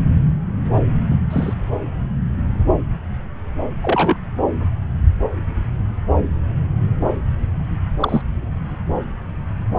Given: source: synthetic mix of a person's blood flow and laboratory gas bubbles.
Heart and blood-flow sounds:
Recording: Doppler ultrasound of blood flow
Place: subclavian vein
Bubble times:
1.10-1.20 s: bubbles
1.30-1.54 s: bubbles
3.83-4.17 s: bubbles
8.00-8.22 s: bubbles
From the record:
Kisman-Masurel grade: 122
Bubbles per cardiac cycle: 1 to 2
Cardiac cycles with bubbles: 10 to 50%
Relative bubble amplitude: moderate (0.250 to 0.450)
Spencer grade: 2 (many but less than half of the cardiac periods contain bubble signals, singularly or in groups)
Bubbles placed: anywhere in the cardiac cycle

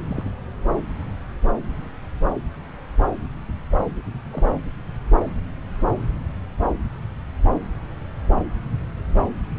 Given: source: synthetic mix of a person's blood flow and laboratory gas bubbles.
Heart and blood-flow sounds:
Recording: Doppler ultrasound of blood flow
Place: subclavian vein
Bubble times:
0.08-0.23 s: bubbles
4.27-4.46 s: bubbles
From the record:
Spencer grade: 2 (many but less than half of the cardiac periods contain bubble signals, singularly or in groups)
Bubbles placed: anywhere in the cardiac cycle

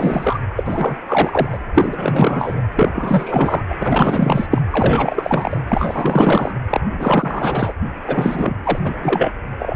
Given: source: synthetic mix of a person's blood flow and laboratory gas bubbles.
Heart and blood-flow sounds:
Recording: Doppler ultrasound of blood flow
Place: precordium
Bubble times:
0.00-0.39 s: bubbles
0.56-0.97 s: bubbles
1.07-1.58 s: bubbles
1.74-2.64 s: bubbles
2.75-3.62 s: bubbles
3.70-3.75 s: bubbles
3.79-4.47 s: bubbles
4.50-4.62 s: bubbles
4.71-5.61 s: bubbles
5.68-6.57 s: bubbles
6.69-6.80 s: bubbles
6.89-7.72 s: bubbles
8.07-8.56 s: bubbles
8.63-8.79 s: bubbles
8.83-8.95 s: bubbles
9.02-9.33 s: bubbles
9.59-9.76 s: bubbles
From the record:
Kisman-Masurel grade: 444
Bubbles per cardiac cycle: continuous sound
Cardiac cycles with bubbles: 100%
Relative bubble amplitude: maximal (0.775 to 0.999)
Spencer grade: 4 (maximum detectable bubble signal sounding continuously throughout systole and diastole of every cardiac period, and overriding the amplitude of the normal cardiac signals)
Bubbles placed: anywhere in the cardiac cycle

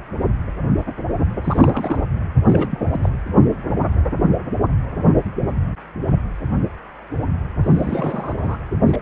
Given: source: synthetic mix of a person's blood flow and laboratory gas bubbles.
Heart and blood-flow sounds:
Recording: Doppler ultrasound of blood flow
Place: precordium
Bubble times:
1.44-2.02 s: bubbles
2.46-2.82 s: bubbles
2.90-3.10 s: bubbles
7.61-8.34 s: bubbles
8.38-8.57 s: bubbles
8.87-8.96 s: bubbles
From the record:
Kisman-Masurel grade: 222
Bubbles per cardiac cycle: several, 3 to 8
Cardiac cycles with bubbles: 10 to 50%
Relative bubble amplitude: moderate (0.250 to 0.450)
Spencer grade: 2 (many but less than half of the cardiac periods contain bubble signals, singularly or in groups)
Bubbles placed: anywhere in the cardiac cycle

